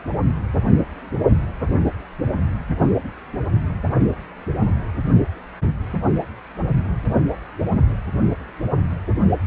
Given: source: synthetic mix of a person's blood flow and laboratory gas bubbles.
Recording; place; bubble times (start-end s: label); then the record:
Doppler ultrasound of blood flow; precordium
no bubbles
From the record:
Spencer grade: 0 (complete lack of bubble signals)